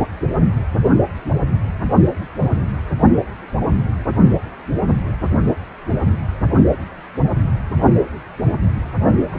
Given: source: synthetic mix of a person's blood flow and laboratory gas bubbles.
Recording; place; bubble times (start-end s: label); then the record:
Doppler ultrasound of blood flow; precordium
9.31-9.38 s: bubbles
From the record:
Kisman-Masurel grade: 111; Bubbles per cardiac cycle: 1 to 2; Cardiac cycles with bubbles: 1 to 10%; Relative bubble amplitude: barely perceptible (0.100 to 0.250); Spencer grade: 1 (occasional bubble signal discernible with the cardiac motion signal, with majority of cardiac periods free of bubbles); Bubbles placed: only in the low amplitude regions of the cardiac cycle